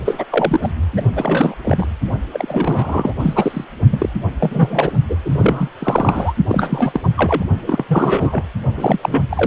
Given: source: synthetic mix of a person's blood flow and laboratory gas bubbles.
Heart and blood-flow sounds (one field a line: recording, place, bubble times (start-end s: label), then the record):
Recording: Doppler ultrasound of blood flow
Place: precordium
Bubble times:
0.05-0.26 s: bubbles
0.31-0.72 s: bubbles
0.93-1.02 s: bubbles
1.16-1.55 s: bubbles
1.64-1.88 s: bubbles
2.31-3.13 s: bubbles
3.19-3.65 s: bubbles
3.90-4.09 s: bubbles
4.40-4.98 s: bubbles
5.09-5.16 s: bubbles
5.24-5.69 s: bubbles
5.79-6.33 s: bubbles
6.48-7.08 s: bubbles
7.17-7.44 s: bubbles
7.67-7.84 s: bubbles
7.88-8.44 s: bubbles
8.75-9.23 s: bubbles
9.30-9.47 s: bubbles
From the record:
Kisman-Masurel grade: 343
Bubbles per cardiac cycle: rolling drumbeat, 9 or more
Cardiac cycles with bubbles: 100%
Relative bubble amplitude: loud (0.450 to 0.775)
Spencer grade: 3 (all of the cardiac periods contain showers or single bubble signals, but not dominating or overriding the cardiac motion signals)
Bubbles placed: only in the low amplitude regions of the cardiac cycle